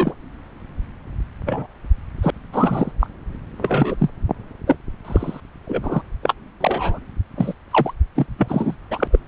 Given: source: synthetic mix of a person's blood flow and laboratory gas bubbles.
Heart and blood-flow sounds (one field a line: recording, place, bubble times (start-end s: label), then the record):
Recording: Doppler ultrasound of blood flow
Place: subclavian vein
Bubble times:
0.00-0.14 s: bubbles
1.46-1.67 s: bubbles
2.22-2.31 s: bubbles
2.52-2.92 s: bubbles
3.00-3.08 s: bubbles
3.58-4.09 s: bubbles
4.67-4.76 s: bubbles
5.04-5.41 s: bubbles
5.67-6.02 s: bubbles
6.23-6.33 s: bubbles
6.61-6.99 s: bubbles
7.36-7.54 s: bubbles
7.71-7.94 s: bubbles
8.15-8.26 s: bubbles
8.38-8.75 s: bubbles
8.90-9.07 s: bubbles
9.11-9.19 s: bubbles
From the record:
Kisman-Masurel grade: 243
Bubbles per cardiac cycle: several, 3 to 8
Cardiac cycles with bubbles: 100%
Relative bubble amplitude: loud (0.450 to 0.775)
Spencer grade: 3 (all of the cardiac periods contain showers or single bubble signals, but not dominating or overriding the cardiac motion signals)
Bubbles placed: anywhere in the cardiac cycle